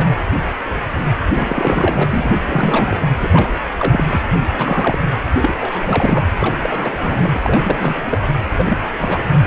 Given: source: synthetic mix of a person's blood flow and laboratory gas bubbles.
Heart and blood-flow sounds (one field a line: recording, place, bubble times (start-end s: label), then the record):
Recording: Doppler ultrasound of blood flow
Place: precordium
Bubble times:
0.00-0.05 s: bubbles
1.31-2.40 s: bubbles
2.46-2.98 s: bubbles
3.19-3.28 s: bubbles
3.31-3.48 s: bubbles
3.79-4.20 s: bubbles
4.57-5.00 s: bubbles
5.41-5.54 s: bubbles
5.59-6.26 s: bubbles
6.39-7.37 s: bubbles
7.42-8.21 s: bubbles
8.58-8.78 s: bubbles
8.99-9.24 s: bubbles
From the record:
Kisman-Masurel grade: 333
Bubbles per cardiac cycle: rolling drumbeat, 9 or more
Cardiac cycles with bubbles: 50 to 99%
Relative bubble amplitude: loud (0.450 to 0.775)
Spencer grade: 3 (all of the cardiac periods contain showers or single bubble signals, but not dominating or overriding the cardiac motion signals)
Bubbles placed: anywhere in the cardiac cycle